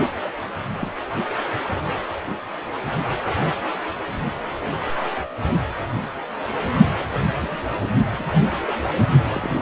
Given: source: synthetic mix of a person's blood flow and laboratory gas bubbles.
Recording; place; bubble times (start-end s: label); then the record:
Doppler ultrasound of blood flow; precordium
0.24-0.28 s: bubbles
0.79-0.91 s: bubbles
7.41-7.60 s: bubbles
8.19-8.35 s: bubbles
8.58-8.76 s: bubbles
9.13-9.22 s: bubbles
9.32-9.62 s: bubbles
From the record:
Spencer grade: 2 (many but less than half of the cardiac periods contain bubble signals, singularly or in groups); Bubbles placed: anywhere in the cardiac cycle